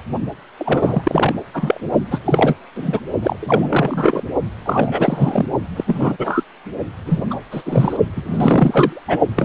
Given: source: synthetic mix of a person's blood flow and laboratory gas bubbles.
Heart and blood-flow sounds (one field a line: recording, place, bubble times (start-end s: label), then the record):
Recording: Doppler ultrasound of blood flow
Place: precordium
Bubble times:
0.57-1.35 s: bubbles
1.54-1.81 s: bubbles
2.10-2.19 s: bubbles
2.25-2.54 s: bubbles
2.75-2.99 s: bubbles
3.22-3.36 s: bubbles
3.40-4.24 s: bubbles
4.66-5.46 s: bubbles
5.76-5.84 s: bubbles
5.87-6.44 s: bubbles
7.06-7.24 s: bubbles
7.30-7.39 s: bubbles
7.51-7.62 s: bubbles
7.65-7.97 s: bubbles
8.16-9.05 s: bubbles
9.08-9.18 s: bubbles
9.36-9.45 s: bubbles
From the record:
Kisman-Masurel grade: 343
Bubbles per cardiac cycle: rolling drumbeat, 9 or more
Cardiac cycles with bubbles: 100%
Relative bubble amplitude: loud (0.450 to 0.775)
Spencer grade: 3 (all of the cardiac periods contain showers or single bubble signals, but not dominating or overriding the cardiac motion signals)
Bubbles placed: only in the low amplitude regions of the cardiac cycle